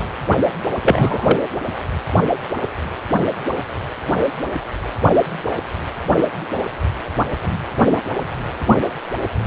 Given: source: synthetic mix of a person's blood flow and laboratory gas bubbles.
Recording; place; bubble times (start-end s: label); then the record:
Doppler ultrasound of blood flow; precordium
0.82-1.36 s: bubbles
From the record:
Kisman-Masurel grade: 213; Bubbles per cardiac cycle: several, 3 to 8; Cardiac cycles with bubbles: 1 to 10%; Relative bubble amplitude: loud (0.450 to 0.775); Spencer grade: 1 (occasional bubble signal discernible with the cardiac motion signal, with majority of cardiac periods free of bubbles); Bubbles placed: anywhere in the cardiac cycle